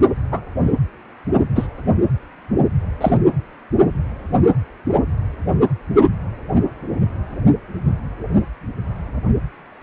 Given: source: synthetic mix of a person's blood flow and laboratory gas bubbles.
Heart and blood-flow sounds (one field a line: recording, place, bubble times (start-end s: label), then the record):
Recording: Doppler ultrasound of blood flow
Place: precordium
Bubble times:
0.32-0.41 s: bubbles
1.55-1.67 s: bubbles
3.00-3.17 s: bubbles
9.81-9.83 s: bubbles
From the record:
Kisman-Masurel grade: 123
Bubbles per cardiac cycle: 1 to 2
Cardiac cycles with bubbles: 10 to 50%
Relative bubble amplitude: loud (0.450 to 0.775)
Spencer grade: 2 (many but less than half of the cardiac periods contain bubble signals, singularly or in groups)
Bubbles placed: anywhere in the cardiac cycle